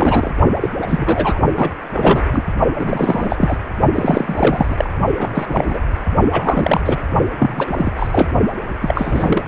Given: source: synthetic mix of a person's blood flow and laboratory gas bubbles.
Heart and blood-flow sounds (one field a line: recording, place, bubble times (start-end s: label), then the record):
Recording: Doppler ultrasound of blood flow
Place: precordium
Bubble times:
0.00-0.31 s: bubbles
0.60-0.69 s: bubbles
0.82-1.39 s: bubbles
1.56-1.71 s: bubbles
1.93-2.23 s: bubbles
2.33-2.43 s: bubbles
2.79-3.57 s: bubbles
3.94-4.89 s: bubbles
5.18-5.80 s: bubbles
6.32-6.98 s: bubbles
7.39-7.92 s: bubbles
7.96-8.29 s: bubbles
8.81-9.44 s: bubbles
From the record:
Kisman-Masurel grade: 343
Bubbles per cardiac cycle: rolling drumbeat, 9 or more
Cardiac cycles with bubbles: 100%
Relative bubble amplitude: loud (0.450 to 0.775)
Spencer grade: 3 (all of the cardiac periods contain showers or single bubble signals, but not dominating or overriding the cardiac motion signals)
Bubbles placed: only in the low amplitude regions of the cardiac cycle